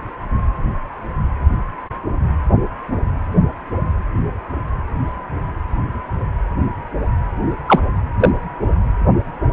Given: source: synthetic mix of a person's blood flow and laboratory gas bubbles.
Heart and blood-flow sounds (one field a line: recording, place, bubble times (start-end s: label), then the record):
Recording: Doppler ultrasound of blood flow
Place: precordium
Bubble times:
7.67-7.79 s: bubbles
8.20-8.29 s: bubbles
From the record:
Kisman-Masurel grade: 123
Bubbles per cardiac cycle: 1 to 2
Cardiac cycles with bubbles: 10 to 50%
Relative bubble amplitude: loud (0.450 to 0.775)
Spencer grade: 2 (many but less than half of the cardiac periods contain bubble signals, singularly or in groups)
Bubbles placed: anywhere in the cardiac cycle